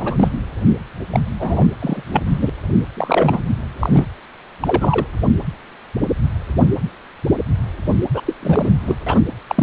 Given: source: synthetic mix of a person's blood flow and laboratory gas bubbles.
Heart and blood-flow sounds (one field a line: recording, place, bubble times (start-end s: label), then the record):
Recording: Doppler ultrasound of blood flow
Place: precordium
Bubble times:
0.00-0.30 s: bubbles
1.10-1.20 s: bubbles
1.39-1.68 s: bubbles
1.79-2.03 s: bubbles
2.12-2.23 s: bubbles
2.27-2.50 s: bubbles
2.95-3.40 s: bubbles
3.79-4.05 s: bubbles
4.60-5.07 s: bubbles
8.13-8.21 s: bubbles
8.26-8.33 s: bubbles
8.42-8.71 s: bubbles
8.86-8.96 s: bubbles
9.06-9.21 s: bubbles
9.48-9.63 s: bubbles
From the record:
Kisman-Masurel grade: 232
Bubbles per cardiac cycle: several, 3 to 8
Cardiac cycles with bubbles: 50 to 99%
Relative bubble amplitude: moderate (0.250 to 0.450)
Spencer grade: 3 (all of the cardiac periods contain showers or single bubble signals, but not dominating or overriding the cardiac motion signals)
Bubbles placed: anywhere in the cardiac cycle